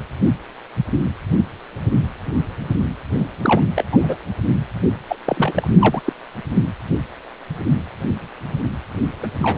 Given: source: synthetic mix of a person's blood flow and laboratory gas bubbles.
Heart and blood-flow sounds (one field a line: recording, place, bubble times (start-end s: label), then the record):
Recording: Doppler ultrasound of blood flow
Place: precordium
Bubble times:
3.42-3.61 s: bubbles
3.76-3.83 s: bubbles
3.92-3.98 s: bubbles
4.02-4.16 s: bubbles
5.08-5.16 s: bubbles
5.26-5.68 s: bubbles
5.79-6.02 s: bubbles
6.05-6.12 s: bubbles
9.23-9.27 s: bubbles
9.40-9.58 s: bubbles
From the record:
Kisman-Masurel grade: 222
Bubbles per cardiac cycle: several, 3 to 8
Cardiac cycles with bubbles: 10 to 50%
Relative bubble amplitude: moderate (0.250 to 0.450)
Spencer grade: 2 (many but less than half of the cardiac periods contain bubble signals, singularly or in groups)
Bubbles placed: anywhere in the cardiac cycle